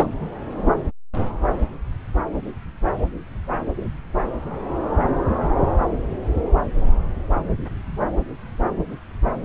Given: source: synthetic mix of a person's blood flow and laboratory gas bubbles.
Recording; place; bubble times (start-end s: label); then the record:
Doppler ultrasound of blood flow; subclavian vein
0.00-0.07 s: bubbles
From the record:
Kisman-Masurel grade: 223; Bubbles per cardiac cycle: several, 3 to 8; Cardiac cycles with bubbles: 10 to 50%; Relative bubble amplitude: loud (0.450 to 0.775); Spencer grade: 2 (many but less than half of the cardiac periods contain bubble signals, singularly or in groups); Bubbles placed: anywhere in the cardiac cycle